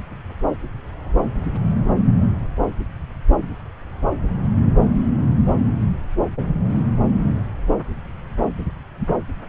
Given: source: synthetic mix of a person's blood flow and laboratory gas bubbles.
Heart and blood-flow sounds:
Doppler ultrasound of blood flow; subclavian vein
no bubbles
From the record:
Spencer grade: 0 (complete lack of bubble signals)

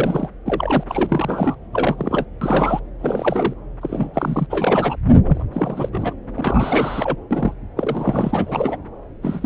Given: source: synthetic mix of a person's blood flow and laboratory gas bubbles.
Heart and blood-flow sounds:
Doppler ultrasound of blood flow; subclavian vein
0.00-0.29 s: bubbles
0.45-0.83 s: bubbles
0.88-1.56 s: bubbles
1.73-2.25 s: bubbles
2.41-2.80 s: bubbles
2.99-3.53 s: bubbles
3.81-4.46 s: bubbles
4.50-4.96 s: bubbles
5.23-5.43 s: bubbles
5.52-6.14 s: bubbles
6.36-7.16 s: bubbles
7.30-7.52 s: bubbles
7.76-8.77 s: bubbles
9.22-9.46 s: bubbles
From the record:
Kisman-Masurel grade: 342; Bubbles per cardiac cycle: rolling drumbeat, 9 or more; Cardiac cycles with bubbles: 100%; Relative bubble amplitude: moderate (0.250 to 0.450); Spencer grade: 3 (all of the cardiac periods contain showers or single bubble signals, but not dominating or overriding the cardiac motion signals); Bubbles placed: anywhere in the cardiac cycle

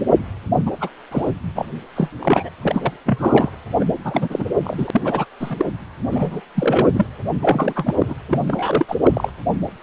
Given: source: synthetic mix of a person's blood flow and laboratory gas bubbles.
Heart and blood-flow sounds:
Doppler ultrasound of blood flow; precordium
0.66-0.71 s: bubbles
0.80-0.90 s: bubbles
1.11-1.31 s: bubbles
1.54-1.66 s: bubbles
1.95-2.09 s: bubbles
2.19-2.50 s: bubbles
2.62-2.92 s: bubbles
3.06-3.52 s: bubbles
3.79-3.85 s: bubbles
4.04-4.45 s: bubbles
4.64-5.25 s: bubbles
5.40-5.65 s: bubbles
6.10-6.41 s: bubbles
6.55-7.06 s: bubbles
7.42-7.94 s: bubbles
7.99-8.14 s: bubbles
8.28-8.38 s: bubbles
8.47-8.86 s: bubbles
8.88-8.96 s: bubbles
9.04-9.30 s: bubbles
From the record:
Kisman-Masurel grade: 243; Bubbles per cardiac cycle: several, 3 to 8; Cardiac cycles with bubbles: 100%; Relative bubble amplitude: loud (0.450 to 0.775); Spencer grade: 3 (all of the cardiac periods contain showers or single bubble signals, but not dominating or overriding the cardiac motion signals); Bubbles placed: anywhere in the cardiac cycle

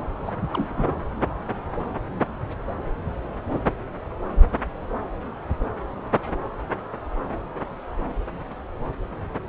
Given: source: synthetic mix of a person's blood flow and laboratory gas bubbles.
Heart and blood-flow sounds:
Doppler ultrasound of blood flow; subclavian vein
0.26-0.31 s: bubbles
0.50-0.94 s: bubbles
From the record:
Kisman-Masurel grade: 211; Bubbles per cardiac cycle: several, 3 to 8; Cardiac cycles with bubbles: 1 to 10%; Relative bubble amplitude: barely perceptible (0.100 to 0.250); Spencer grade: 1 (occasional bubble signal discernible with the cardiac motion signal, with majority of cardiac periods free of bubbles); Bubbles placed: anywhere in the cardiac cycle

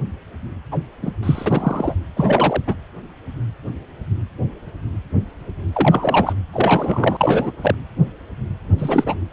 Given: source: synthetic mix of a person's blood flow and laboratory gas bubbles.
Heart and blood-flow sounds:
Doppler ultrasound of blood flow; precordium
0.71-0.79 s: bubbles
1.02-1.10 s: bubbles
1.23-1.94 s: bubbles
2.16-2.62 s: bubbles
2.67-2.76 s: bubbles
5.72-6.33 s: bubbles
6.52-7.52 s: bubbles
7.62-7.75 s: bubbles
8.78-9.16 s: bubbles
From the record:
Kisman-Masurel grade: 223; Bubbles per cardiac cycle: several, 3 to 8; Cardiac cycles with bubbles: 10 to 50%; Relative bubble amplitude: loud (0.450 to 0.775); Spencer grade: 2 (many but less than half of the cardiac periods contain bubble signals, singularly or in groups); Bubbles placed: anywhere in the cardiac cycle

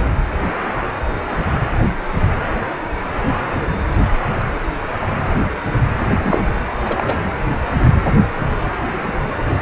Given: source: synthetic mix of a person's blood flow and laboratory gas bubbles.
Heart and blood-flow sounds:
Doppler ultrasound of blood flow; precordium
6.22-6.43 s: bubbles
6.84-7.16 s: bubbles
From the record:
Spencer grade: 2 (many but less than half of the cardiac periods contain bubble signals, singularly or in groups); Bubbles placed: anywhere in the cardiac cycle

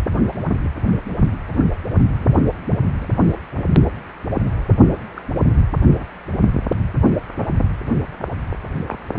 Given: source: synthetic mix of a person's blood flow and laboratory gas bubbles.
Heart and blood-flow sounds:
Doppler ultrasound of blood flow; precordium
3.00-3.11 s: bubbles
3.23-3.40 s: bubbles
5.17-5.23 s: bubbles
5.94-6.07 s: bubbles
6.16-6.19 s: bubbles
8.86-9.03 s: bubbles
From the record:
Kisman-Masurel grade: 121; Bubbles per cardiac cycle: 1 to 2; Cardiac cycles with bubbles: 10 to 50%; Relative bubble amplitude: barely perceptible (0.100 to 0.250); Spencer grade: 2 (many but less than half of the cardiac periods contain bubble signals, singularly or in groups); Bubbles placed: only in the low amplitude regions of the cardiac cycle

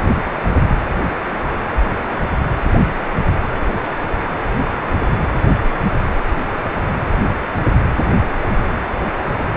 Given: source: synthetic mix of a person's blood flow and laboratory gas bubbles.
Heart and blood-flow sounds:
Doppler ultrasound of blood flow; precordium
no bubbles
From the record:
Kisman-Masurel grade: 000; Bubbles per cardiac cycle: 0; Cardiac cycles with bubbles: 0%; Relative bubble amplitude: no bubbles discernible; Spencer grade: 0 (complete lack of bubble signals)

